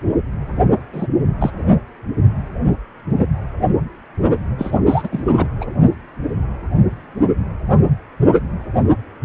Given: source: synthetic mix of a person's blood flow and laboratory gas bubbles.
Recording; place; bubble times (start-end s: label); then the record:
Doppler ultrasound of blood flow; precordium
0.93-1.07 s: bubbles
1.40-1.51 s: bubbles
4.58-4.79 s: bubbles
4.87-5.09 s: bubbles
5.12-5.24 s: bubbles
5.37-5.47 s: bubbles
5.61-5.66 s: bubbles
From the record:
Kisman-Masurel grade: 222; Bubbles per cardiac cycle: several, 3 to 8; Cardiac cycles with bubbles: 10 to 50%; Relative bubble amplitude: moderate (0.250 to 0.450); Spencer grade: 2 (many but less than half of the cardiac periods contain bubble signals, singularly or in groups); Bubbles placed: only in the low amplitude regions of the cardiac cycle